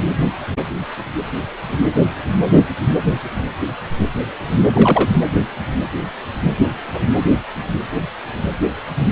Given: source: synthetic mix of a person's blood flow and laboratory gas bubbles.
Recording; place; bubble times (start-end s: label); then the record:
Doppler ultrasound of blood flow; precordium
4.73-5.09 s: bubbles
From the record:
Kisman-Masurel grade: 212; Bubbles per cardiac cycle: several, 3 to 8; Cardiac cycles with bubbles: 1 to 10%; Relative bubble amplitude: moderate (0.250 to 0.450); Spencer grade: 1 (occasional bubble signal discernible with the cardiac motion signal, with majority of cardiac periods free of bubbles); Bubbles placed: anywhere in the cardiac cycle